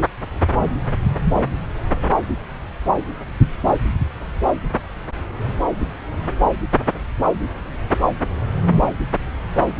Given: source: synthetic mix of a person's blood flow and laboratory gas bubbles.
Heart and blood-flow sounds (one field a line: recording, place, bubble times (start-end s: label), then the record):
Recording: Doppler ultrasound of blood flow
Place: subclavian vein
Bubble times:
8.80-8.90 s: bubbles
From the record:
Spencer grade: 2 (many but less than half of the cardiac periods contain bubble signals, singularly or in groups)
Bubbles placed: anywhere in the cardiac cycle